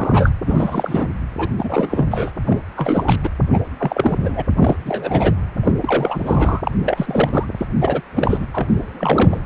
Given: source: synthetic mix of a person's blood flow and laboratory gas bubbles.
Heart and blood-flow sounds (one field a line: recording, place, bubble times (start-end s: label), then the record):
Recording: Doppler ultrasound of blood flow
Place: precordium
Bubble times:
0.00-0.31 s: bubbles
0.45-1.06 s: bubbles
1.38-1.48 s: bubbles
1.57-2.32 s: bubbles
2.46-2.59 s: bubbles
2.76-3.16 s: bubbles
3.23-3.29 s: bubbles
3.52-3.59 s: bubbles
3.78-4.42 s: bubbles
4.56-4.76 s: bubbles
4.85-5.34 s: bubbles
5.63-5.72 s: bubbles
5.81-6.61 s: bubbles
6.64-6.72 s: bubbles
6.83-7.45 s: bubbles
7.57-7.66 s: bubbles
7.81-8.01 s: bubbles
8.15-8.46 s: bubbles
8.54-9.41 s: bubbles
From the record:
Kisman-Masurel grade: 342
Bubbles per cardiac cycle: rolling drumbeat, 9 or more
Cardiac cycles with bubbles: 100%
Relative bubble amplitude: moderate (0.250 to 0.450)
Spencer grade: 3 (all of the cardiac periods contain showers or single bubble signals, but not dominating or overriding the cardiac motion signals)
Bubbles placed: anywhere in the cardiac cycle